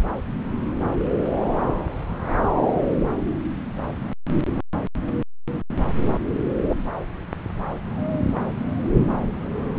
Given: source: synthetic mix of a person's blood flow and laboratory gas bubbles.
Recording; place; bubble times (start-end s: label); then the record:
Doppler ultrasound of blood flow; subclavian vein
no bubbles
From the record:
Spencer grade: 0 (complete lack of bubble signals)